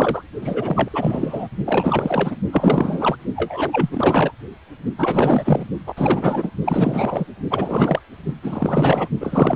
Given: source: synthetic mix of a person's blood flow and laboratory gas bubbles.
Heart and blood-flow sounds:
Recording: Doppler ultrasound of blood flow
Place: precordium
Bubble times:
0.00-0.23 s: bubbles
0.40-1.48 s: bubbles
1.65-2.37 s: bubbles
2.52-3.16 s: bubbles
3.36-4.33 s: bubbles
4.98-5.66 s: bubbles
5.86-6.50 s: bubbles
6.64-7.26 s: bubbles
7.50-7.99 s: bubbles
8.43-9.08 s: bubbles
9.20-9.55 s: bubbles
From the record:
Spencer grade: 4 (maximum detectable bubble signal sounding continuously throughout systole and diastole of every cardiac period, and overriding the amplitude of the normal cardiac signals)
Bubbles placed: only in the low amplitude regions of the cardiac cycle

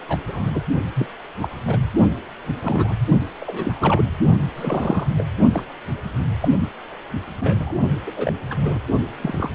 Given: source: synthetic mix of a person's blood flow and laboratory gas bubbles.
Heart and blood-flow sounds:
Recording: Doppler ultrasound of blood flow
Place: precordium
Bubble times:
0.09-0.20 s: bubbles
0.28-0.60 s: bubbles
0.95-1.08 s: bubbles
1.42-1.49 s: bubbles
1.67-1.77 s: bubbles
2.61-2.94 s: bubbles
3.42-4.04 s: bubbles
4.55-5.07 s: bubbles
5.17-5.25 s: bubbles
5.52-5.66 s: bubbles
6.42-6.49 s: bubbles
6.59-6.69 s: bubbles
7.40-7.75 s: bubbles
8.06-8.12 s: bubbles
8.17-8.32 s: bubbles
8.50-8.79 s: bubbles
9.22-9.49 s: bubbles
From the record:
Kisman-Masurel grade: 242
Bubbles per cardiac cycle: several, 3 to 8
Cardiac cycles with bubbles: 100%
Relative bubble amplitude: moderate (0.250 to 0.450)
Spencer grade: 3 (all of the cardiac periods contain showers or single bubble signals, but not dominating or overriding the cardiac motion signals)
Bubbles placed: only in the low amplitude regions of the cardiac cycle

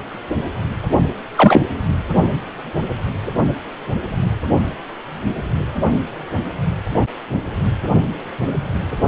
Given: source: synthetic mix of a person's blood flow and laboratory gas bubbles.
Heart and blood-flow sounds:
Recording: Doppler ultrasound of blood flow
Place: precordium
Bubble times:
1.35-1.61 s: bubbles
From the record:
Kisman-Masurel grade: 213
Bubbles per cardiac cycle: several, 3 to 8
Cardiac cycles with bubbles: 1 to 10%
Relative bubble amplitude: loud (0.450 to 0.775)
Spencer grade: 1 (occasional bubble signal discernible with the cardiac motion signal, with majority of cardiac periods free of bubbles)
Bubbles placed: only in the low amplitude regions of the cardiac cycle

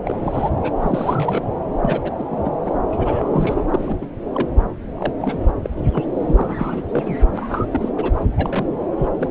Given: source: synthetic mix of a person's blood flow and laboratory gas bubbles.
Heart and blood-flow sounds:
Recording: Doppler ultrasound of blood flow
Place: subclavian vein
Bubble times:
0.05-0.15 s: bubbles
0.21-0.50 s: bubbles
0.61-1.47 s: bubbles
1.81-2.11 s: bubbles
2.18-2.23 s: bubbles
2.30-2.51 s: bubbles
2.64-2.83 s: bubbles
2.91-3.62 s: bubbles
3.73-3.95 s: bubbles
4.01-4.06 s: bubbles
4.33-4.49 s: bubbles
4.97-5.12 s: bubbles
5.19-5.39 s: bubbles
5.62-5.69 s: bubbles
5.93-6.04 s: bubbles
6.23-6.82 s: bubbles
6.89-7.17 s: bubbles
7.38-7.65 s: bubbles
7.71-7.90 s: bubbles
7.96-8.12 s: bubbles
8.29-8.86 s: bubbles
8.97-9.08 s: bubbles
9.15-9.31 s: bubbles
From the record:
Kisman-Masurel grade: 242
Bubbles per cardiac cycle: several, 3 to 8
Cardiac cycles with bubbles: 100%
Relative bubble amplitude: moderate (0.250 to 0.450)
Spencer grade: 3 (all of the cardiac periods contain showers or single bubble signals, but not dominating or overriding the cardiac motion signals)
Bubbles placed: anywhere in the cardiac cycle

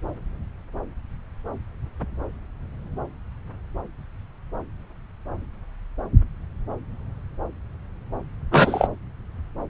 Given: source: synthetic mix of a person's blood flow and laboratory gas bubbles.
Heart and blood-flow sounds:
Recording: Doppler ultrasound of blood flow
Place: subclavian vein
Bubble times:
8.51-8.88 s: bubbles
From the record:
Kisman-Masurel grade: 113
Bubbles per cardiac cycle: 1 to 2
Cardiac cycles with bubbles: 1 to 10%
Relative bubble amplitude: loud (0.450 to 0.775)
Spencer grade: 1 (occasional bubble signal discernible with the cardiac motion signal, with majority of cardiac periods free of bubbles)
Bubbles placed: anywhere in the cardiac cycle

